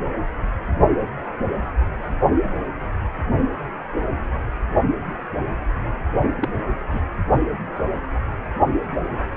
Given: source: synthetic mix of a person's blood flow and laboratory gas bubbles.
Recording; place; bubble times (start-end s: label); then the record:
Doppler ultrasound of blood flow; precordium
6.40-6.49 s: bubbles
6.91-6.99 s: bubbles
From the record:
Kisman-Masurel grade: 111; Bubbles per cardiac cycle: 1 to 2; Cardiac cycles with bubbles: 1 to 10%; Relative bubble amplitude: barely perceptible (0.100 to 0.250); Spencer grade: 1 (occasional bubble signal discernible with the cardiac motion signal, with majority of cardiac periods free of bubbles); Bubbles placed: only in the low amplitude regions of the cardiac cycle